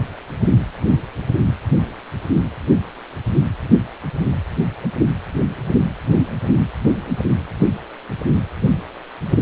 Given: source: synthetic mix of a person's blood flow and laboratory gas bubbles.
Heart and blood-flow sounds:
Doppler ultrasound of blood flow; precordium
no bubbles
From the record:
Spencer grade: 0 (complete lack of bubble signals)

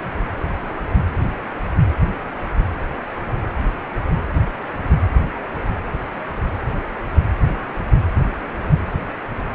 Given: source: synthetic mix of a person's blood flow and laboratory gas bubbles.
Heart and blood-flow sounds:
Doppler ultrasound of blood flow; precordium
no bubbles
From the record:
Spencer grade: 0 (complete lack of bubble signals)

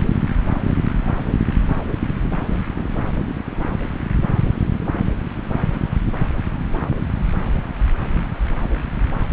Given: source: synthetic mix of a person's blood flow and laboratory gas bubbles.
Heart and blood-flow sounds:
Doppler ultrasound of blood flow; subclavian vein
no bubbles
From the record:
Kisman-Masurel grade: 000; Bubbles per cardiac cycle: 0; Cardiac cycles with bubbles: 0%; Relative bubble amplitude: no bubbles discernible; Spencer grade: 0 (complete lack of bubble signals)

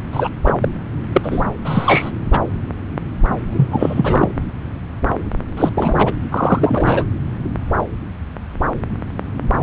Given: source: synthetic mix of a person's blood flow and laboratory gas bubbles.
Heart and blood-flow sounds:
Doppler ultrasound of blood flow; subclavian vein
0.13-0.29 s: bubbles
0.45-0.53 s: bubbles
0.60-0.69 s: bubbles
1.12-1.43 s: bubbles
1.65-2.11 s: bubbles
2.32-2.40 s: bubbles
3.52-4.29 s: bubbles
5.57-5.71 s: bubbles
5.75-6.14 s: bubbles
6.31-7.04 s: bubbles
From the record:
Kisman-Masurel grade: 223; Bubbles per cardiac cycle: several, 3 to 8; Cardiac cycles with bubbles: 10 to 50%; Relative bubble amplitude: loud (0.450 to 0.775); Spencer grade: 2 (many but less than half of the cardiac periods contain bubble signals, singularly or in groups); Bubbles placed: anywhere in the cardiac cycle

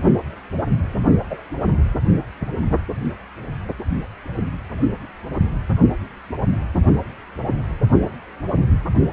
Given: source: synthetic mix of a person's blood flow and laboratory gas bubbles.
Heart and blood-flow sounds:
Doppler ultrasound of blood flow; precordium
1.29-1.38 s: bubbles
From the record:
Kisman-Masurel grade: 122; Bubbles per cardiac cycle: 1 to 2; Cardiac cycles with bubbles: 10 to 50%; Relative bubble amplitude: moderate (0.250 to 0.450); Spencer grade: 2 (many but less than half of the cardiac periods contain bubble signals, singularly or in groups); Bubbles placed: only in the low amplitude regions of the cardiac cycle

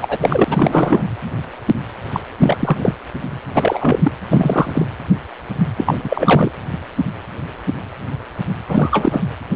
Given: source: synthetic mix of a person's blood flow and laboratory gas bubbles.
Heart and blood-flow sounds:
Doppler ultrasound of blood flow; precordium
0.01-1.02 s: bubbles
2.13-2.20 s: bubbles
2.38-2.92 s: bubbles
3.54-4.12 s: bubbles
4.32-4.86 s: bubbles
5.77-6.51 s: bubbles
8.68-9.21 s: bubbles
From the record:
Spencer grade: 3 (all of the cardiac periods contain showers or single bubble signals, but not dominating or overriding the cardiac motion signals); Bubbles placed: anywhere in the cardiac cycle

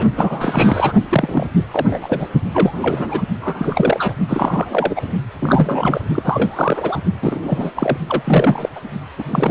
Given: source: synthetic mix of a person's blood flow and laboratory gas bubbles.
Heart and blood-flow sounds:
Doppler ultrasound of blood flow; precordium
0.00-0.05 s: bubbles
0.16-0.93 s: bubbles
1.09-1.47 s: bubbles
1.71-2.28 s: bubbles
2.51-2.72 s: bubbles
2.82-3.22 s: bubbles
3.41-4.13 s: bubbles
4.28-5.02 s: bubbles
5.39-6.01 s: bubbles
6.14-7.00 s: bubbles
7.21-7.72 s: bubbles
7.75-7.98 s: bubbles
8.07-8.69 s: bubbles
8.75-8.80 s: bubbles
9.18-9.23 s: bubbles
9.26-9.50 s: bubbles
From the record:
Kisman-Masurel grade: 343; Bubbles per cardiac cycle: rolling drumbeat, 9 or more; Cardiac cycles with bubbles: 100%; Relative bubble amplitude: loud (0.450 to 0.775); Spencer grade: 3 (all of the cardiac periods contain showers or single bubble signals, but not dominating or overriding the cardiac motion signals); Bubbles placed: only in the low amplitude regions of the cardiac cycle

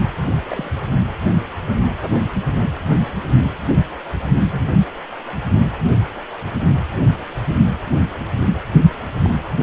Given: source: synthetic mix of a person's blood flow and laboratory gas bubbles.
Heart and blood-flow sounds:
Doppler ultrasound of blood flow; precordium
0.48-0.71 s: bubbles
4.52-4.64 s: bubbles
9.23-9.30 s: bubbles
From the record:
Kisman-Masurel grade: 121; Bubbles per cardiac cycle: 1 to 2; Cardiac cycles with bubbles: 10 to 50%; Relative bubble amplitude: barely perceptible (0.100 to 0.250); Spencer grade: 2 (many but less than half of the cardiac periods contain bubble signals, singularly or in groups); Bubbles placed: only in the low amplitude regions of the cardiac cycle

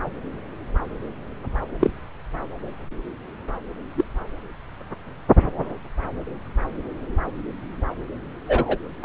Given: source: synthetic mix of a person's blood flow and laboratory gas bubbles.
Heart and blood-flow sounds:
Doppler ultrasound of blood flow; subclavian vein
1.80-1.90 s: bubbles
3.96-4.04 s: bubbles
8.47-8.78 s: bubbles
9.00-9.05 s: bubbles
From the record:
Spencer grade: 2 (many but less than half of the cardiac periods contain bubble signals, singularly or in groups); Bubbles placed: anywhere in the cardiac cycle

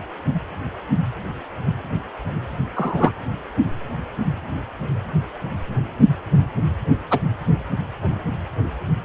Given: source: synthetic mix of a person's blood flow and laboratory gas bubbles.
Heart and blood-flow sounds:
Doppler ultrasound of blood flow; precordium
2.75-3.12 s: bubbles
7.10-7.19 s: bubbles
From the record:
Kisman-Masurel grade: 123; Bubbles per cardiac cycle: 1 to 2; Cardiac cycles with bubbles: 10 to 50%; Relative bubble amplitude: loud (0.450 to 0.775); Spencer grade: 2 (many but less than half of the cardiac periods contain bubble signals, singularly or in groups); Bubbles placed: anywhere in the cardiac cycle

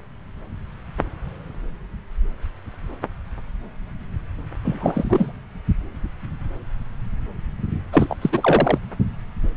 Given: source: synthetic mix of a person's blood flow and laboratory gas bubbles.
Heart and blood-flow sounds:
Doppler ultrasound of blood flow; subclavian vein
4.64-5.33 s: bubbles
7.92-8.14 s: bubbles
8.21-8.78 s: bubbles
From the record:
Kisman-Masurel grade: 223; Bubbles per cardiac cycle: several, 3 to 8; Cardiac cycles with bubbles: 10 to 50%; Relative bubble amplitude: loud (0.450 to 0.775); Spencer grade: 2 (many but less than half of the cardiac periods contain bubble signals, singularly or in groups); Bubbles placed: anywhere in the cardiac cycle

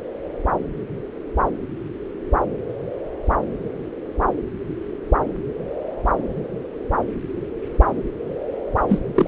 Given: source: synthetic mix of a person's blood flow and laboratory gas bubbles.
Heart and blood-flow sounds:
Doppler ultrasound of blood flow; subclavian vein
8.88-8.99 s: bubbles
9.14-9.28 s: bubbles
From the record:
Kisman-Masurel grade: 222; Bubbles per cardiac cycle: several, 3 to 8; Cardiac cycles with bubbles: 10 to 50%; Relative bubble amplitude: moderate (0.250 to 0.450); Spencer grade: 2 (many but less than half of the cardiac periods contain bubble signals, singularly or in groups); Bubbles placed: anywhere in the cardiac cycle

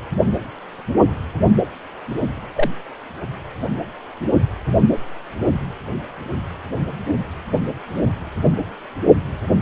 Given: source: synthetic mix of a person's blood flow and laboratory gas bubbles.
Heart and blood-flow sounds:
Doppler ultrasound of blood flow; precordium
2.55-2.70 s: bubbles
From the record:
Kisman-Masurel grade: 122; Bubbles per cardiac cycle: 1 to 2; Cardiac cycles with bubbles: 10 to 50%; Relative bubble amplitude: moderate (0.250 to 0.450); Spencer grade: 2 (many but less than half of the cardiac periods contain bubble signals, singularly or in groups); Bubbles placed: only in the low amplitude regions of the cardiac cycle

